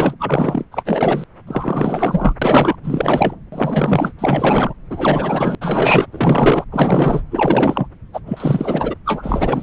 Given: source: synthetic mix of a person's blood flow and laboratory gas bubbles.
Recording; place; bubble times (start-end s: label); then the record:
Doppler ultrasound of blood flow; subclavian vein
0.00-0.15 s: bubbles
0.19-0.65 s: bubbles
0.71-1.24 s: bubbles
1.46-2.33 s: bubbles
2.42-2.76 s: bubbles
2.83-3.35 s: bubbles
3.52-4.12 s: bubbles
4.19-4.74 s: bubbles
4.90-5.55 s: bubbles
5.61-6.06 s: bubbles
6.12-6.65 s: bubbles
6.71-7.23 s: bubbles
7.30-7.88 s: bubbles
8.13-8.20 s: bubbles
8.26-8.94 s: bubbles
9.05-9.63 s: bubbles
From the record:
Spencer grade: 4 (maximum detectable bubble signal sounding continuously throughout systole and diastole of every cardiac period, and overriding the amplitude of the normal cardiac signals); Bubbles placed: anywhere in the cardiac cycle